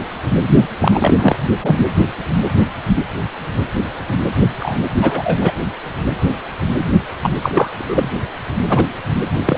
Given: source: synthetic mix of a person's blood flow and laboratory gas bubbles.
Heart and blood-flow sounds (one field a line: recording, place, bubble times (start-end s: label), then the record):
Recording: Doppler ultrasound of blood flow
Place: precordium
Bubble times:
0.79-1.15 s: bubbles
1.17-1.35 s: bubbles
1.62-1.79 s: bubbles
4.60-4.76 s: bubbles
5.01-5.51 s: bubbles
7.22-7.34 s: bubbles
7.42-7.69 s: bubbles
7.78-8.11 s: bubbles
8.68-8.86 s: bubbles
9.45-9.58 s: bubbles
From the record:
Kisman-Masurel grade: 223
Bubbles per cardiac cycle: several, 3 to 8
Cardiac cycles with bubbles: 10 to 50%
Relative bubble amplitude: loud (0.450 to 0.775)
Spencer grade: 2 (many but less than half of the cardiac periods contain bubble signals, singularly or in groups)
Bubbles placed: only in the low amplitude regions of the cardiac cycle